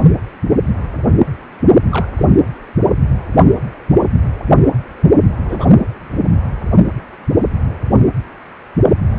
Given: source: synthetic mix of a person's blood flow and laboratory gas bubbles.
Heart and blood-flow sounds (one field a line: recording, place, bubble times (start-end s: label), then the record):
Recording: Doppler ultrasound of blood flow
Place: precordium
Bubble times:
1.90-2.08 s: bubbles
2.17-2.25 s: bubbles
5.45-5.66 s: bubbles
From the record:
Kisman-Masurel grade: 122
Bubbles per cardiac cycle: 1 to 2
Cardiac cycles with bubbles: 10 to 50%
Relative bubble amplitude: moderate (0.250 to 0.450)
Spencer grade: 2 (many but less than half of the cardiac periods contain bubble signals, singularly or in groups)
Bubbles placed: anywhere in the cardiac cycle